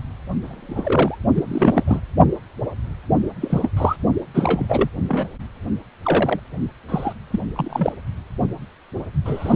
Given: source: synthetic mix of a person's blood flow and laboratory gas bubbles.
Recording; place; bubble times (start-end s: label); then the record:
Doppler ultrasound of blood flow; precordium
0.43-1.18 s: bubbles
1.34-1.43 s: bubbles
1.48-1.84 s: bubbles
1.88-1.99 s: bubbles
3.40-3.70 s: bubbles
3.76-3.96 s: bubbles
4.34-4.66 s: bubbles
4.68-4.88 s: bubbles
5.08-5.26 s: bubbles
6.03-6.39 s: bubbles
6.88-7.13 s: bubbles
7.30-7.42 s: bubbles
7.55-7.93 s: bubbles
9.25-9.56 s: bubbles
From the record:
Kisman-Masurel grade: 232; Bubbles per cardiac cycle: several, 3 to 8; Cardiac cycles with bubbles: 50 to 99%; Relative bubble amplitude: moderate (0.250 to 0.450); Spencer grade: 3 (all of the cardiac periods contain showers or single bubble signals, but not dominating or overriding the cardiac motion signals); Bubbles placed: only in the low amplitude regions of the cardiac cycle